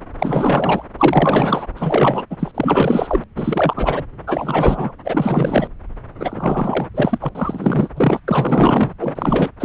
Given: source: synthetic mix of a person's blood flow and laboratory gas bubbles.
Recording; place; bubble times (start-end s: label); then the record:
Doppler ultrasound of blood flow; subclavian vein
0.18-0.82 s: bubbles
0.98-1.67 s: bubbles
1.76-2.25 s: bubbles
2.30-2.36 s: bubbles
2.39-2.51 s: bubbles
2.54-3.24 s: bubbles
3.35-4.04 s: bubbles
4.27-4.92 s: bubbles
5.04-5.67 s: bubbles
6.19-6.87 s: bubbles
6.94-7.29 s: bubbles
7.34-7.89 s: bubbles
7.96-8.20 s: bubbles
8.28-8.93 s: bubbles
8.99-9.49 s: bubbles
9.60-9.65 s: bubbles
From the record:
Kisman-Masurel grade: 444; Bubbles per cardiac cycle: continuous sound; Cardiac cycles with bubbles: 100%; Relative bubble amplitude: maximal (0.775 to 0.999); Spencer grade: 4 (maximum detectable bubble signal sounding continuously throughout systole and diastole of every cardiac period, and overriding the amplitude of the normal cardiac signals); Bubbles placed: anywhere in the cardiac cycle